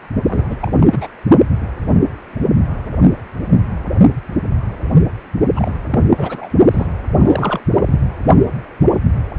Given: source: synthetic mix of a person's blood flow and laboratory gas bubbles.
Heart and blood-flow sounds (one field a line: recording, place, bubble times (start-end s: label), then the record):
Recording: Doppler ultrasound of blood flow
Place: precordium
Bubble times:
0.28-0.57 s: bubbles
0.59-0.71 s: bubbles
0.76-1.07 s: bubbles
5.55-5.73 s: bubbles
5.90-6.04 s: bubbles
6.11-6.49 s: bubbles
6.71-6.87 s: bubbles
7.17-7.60 s: bubbles
7.72-8.00 s: bubbles
From the record:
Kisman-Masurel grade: 332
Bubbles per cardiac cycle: rolling drumbeat, 9 or more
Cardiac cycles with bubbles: 50 to 99%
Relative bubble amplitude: moderate (0.250 to 0.450)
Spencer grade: 3 (all of the cardiac periods contain showers or single bubble signals, but not dominating or overriding the cardiac motion signals)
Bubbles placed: only in the low amplitude regions of the cardiac cycle